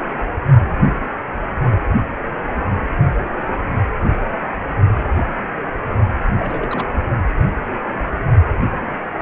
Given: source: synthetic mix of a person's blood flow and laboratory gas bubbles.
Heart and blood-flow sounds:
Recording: Doppler ultrasound of blood flow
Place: precordium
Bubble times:
6.37-6.86 s: bubbles
From the record:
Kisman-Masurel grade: 211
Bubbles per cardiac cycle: several, 3 to 8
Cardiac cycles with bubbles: 1 to 10%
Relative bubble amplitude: barely perceptible (0.100 to 0.250)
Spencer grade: 1 (occasional bubble signal discernible with the cardiac motion signal, with majority of cardiac periods free of bubbles)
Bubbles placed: only in the low amplitude regions of the cardiac cycle

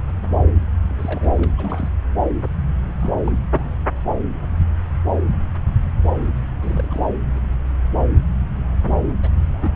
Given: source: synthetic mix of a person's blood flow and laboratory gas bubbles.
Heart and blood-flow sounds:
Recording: Doppler ultrasound of blood flow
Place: subclavian vein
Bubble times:
0.89-1.52 s: bubbles
1.57-1.89 s: bubbles
2.43-2.49 s: bubbles
2.85-2.92 s: bubbles
3.00-3.14 s: bubbles
3.27-3.31 s: bubbles
3.55-3.78 s: bubbles
6.62-7.08 s: bubbles
7.34-7.39 s: bubbles
9.22-9.29 s: bubbles
9.33-9.71 s: bubbles
From the record:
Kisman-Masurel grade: 221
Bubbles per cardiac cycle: several, 3 to 8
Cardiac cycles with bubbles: 10 to 50%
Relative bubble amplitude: barely perceptible (0.100 to 0.250)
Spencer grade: 2 (many but less than half of the cardiac periods contain bubble signals, singularly or in groups)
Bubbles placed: anywhere in the cardiac cycle

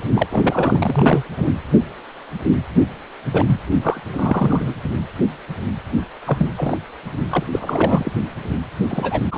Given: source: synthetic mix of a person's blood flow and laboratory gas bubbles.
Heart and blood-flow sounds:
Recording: Doppler ultrasound of blood flow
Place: precordium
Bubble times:
0.15-1.23 s: bubbles
1.38-1.48 s: bubbles
3.31-3.60 s: bubbles
3.82-4.00 s: bubbles
4.13-4.74 s: bubbles
6.26-6.47 s: bubbles
6.57-6.78 s: bubbles
7.30-7.46 s: bubbles
7.51-8.12 s: bubbles
8.88-9.22 s: bubbles
9.31-9.37 s: bubbles
From the record:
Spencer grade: 3 (all of the cardiac periods contain showers or single bubble signals, but not dominating or overriding the cardiac motion signals)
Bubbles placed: anywhere in the cardiac cycle

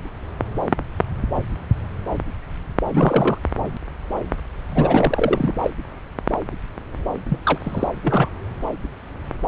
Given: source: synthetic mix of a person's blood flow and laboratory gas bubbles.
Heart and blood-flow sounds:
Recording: Doppler ultrasound of blood flow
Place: subclavian vein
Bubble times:
2.92-3.38 s: bubbles
4.70-5.54 s: bubbles
5.62-5.71 s: bubbles
7.29-7.39 s: bubbles
7.43-7.58 s: bubbles
7.63-7.88 s: bubbles
8.01-8.29 s: bubbles
From the record:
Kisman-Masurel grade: 222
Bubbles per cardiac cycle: several, 3 to 8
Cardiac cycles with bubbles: 10 to 50%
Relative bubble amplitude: moderate (0.250 to 0.450)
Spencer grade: 2 (many but less than half of the cardiac periods contain bubble signals, singularly or in groups)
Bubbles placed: anywhere in the cardiac cycle

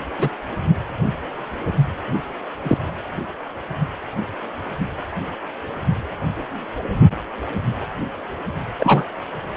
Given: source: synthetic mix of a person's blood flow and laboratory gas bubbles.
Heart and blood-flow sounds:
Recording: Doppler ultrasound of blood flow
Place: precordium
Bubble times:
0.18-0.29 s: bubbles
2.63-2.78 s: bubbles
8.79-9.04 s: bubbles
From the record:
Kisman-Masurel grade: 123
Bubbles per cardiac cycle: 1 to 2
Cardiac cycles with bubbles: 10 to 50%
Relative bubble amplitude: loud (0.450 to 0.775)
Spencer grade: 2 (many but less than half of the cardiac periods contain bubble signals, singularly or in groups)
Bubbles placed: only in the low amplitude regions of the cardiac cycle

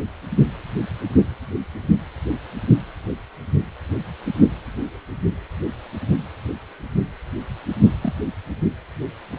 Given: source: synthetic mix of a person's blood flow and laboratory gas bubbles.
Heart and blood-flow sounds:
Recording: Doppler ultrasound of blood flow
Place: precordium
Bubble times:
8.02-8.13 s: bubbles
From the record:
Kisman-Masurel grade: 111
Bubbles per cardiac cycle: 1 to 2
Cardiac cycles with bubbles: 1 to 10%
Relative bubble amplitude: barely perceptible (0.100 to 0.250)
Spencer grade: 1 (occasional bubble signal discernible with the cardiac motion signal, with majority of cardiac periods free of bubbles)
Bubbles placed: only in the low amplitude regions of the cardiac cycle

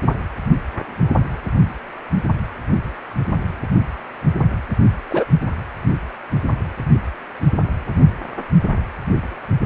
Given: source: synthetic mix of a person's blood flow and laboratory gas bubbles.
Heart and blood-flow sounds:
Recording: Doppler ultrasound of blood flow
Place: precordium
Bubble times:
5.10-5.24 s: bubbles
From the record:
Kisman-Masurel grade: 113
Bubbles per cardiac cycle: 1 to 2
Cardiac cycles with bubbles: 1 to 10%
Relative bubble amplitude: loud (0.450 to 0.775)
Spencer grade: 1 (occasional bubble signal discernible with the cardiac motion signal, with majority of cardiac periods free of bubbles)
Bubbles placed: anywhere in the cardiac cycle

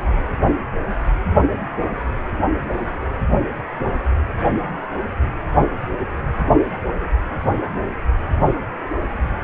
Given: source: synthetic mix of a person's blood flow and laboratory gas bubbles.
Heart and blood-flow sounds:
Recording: Doppler ultrasound of blood flow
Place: precordium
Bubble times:
no bubbles
From the record:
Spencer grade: 0 (complete lack of bubble signals)

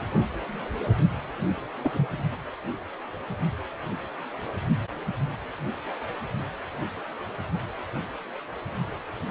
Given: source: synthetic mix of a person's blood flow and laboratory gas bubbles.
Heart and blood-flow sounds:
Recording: Doppler ultrasound of blood flow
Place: precordium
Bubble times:
1.83-2.07 s: bubbles
From the record:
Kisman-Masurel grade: 111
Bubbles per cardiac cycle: 1 to 2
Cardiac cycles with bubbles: 1 to 10%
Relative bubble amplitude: barely perceptible (0.100 to 0.250)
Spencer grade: 1 (occasional bubble signal discernible with the cardiac motion signal, with majority of cardiac periods free of bubbles)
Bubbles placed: only in the low amplitude regions of the cardiac cycle

